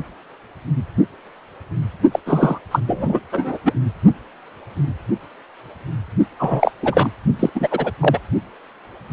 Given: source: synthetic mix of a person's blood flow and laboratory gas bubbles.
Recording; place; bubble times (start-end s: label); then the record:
Doppler ultrasound of blood flow; precordium
2.11-2.19 s: bubbles
2.26-2.59 s: bubbles
2.71-2.80 s: bubbles
2.87-3.19 s: bubbles
3.32-3.57 s: bubbles
3.65-3.73 s: bubbles
6.39-6.71 s: bubbles
6.82-7.11 s: bubbles
7.39-7.50 s: bubbles
7.54-7.68 s: bubbles
7.71-7.92 s: bubbles
8.01-8.19 s: bubbles
From the record:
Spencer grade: 2 (many but less than half of the cardiac periods contain bubble signals, singularly or in groups); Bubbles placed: only in the low amplitude regions of the cardiac cycle